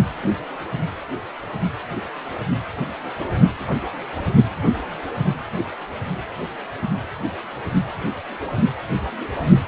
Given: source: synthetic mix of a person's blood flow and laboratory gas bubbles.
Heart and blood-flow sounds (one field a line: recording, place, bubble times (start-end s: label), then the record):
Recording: Doppler ultrasound of blood flow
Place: precordium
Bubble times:
9.66-9.68 s: bubbles
From the record:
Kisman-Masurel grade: 212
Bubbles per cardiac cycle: several, 3 to 8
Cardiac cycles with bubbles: 1 to 10%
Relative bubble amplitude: moderate (0.250 to 0.450)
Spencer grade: 1 (occasional bubble signal discernible with the cardiac motion signal, with majority of cardiac periods free of bubbles)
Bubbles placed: anywhere in the cardiac cycle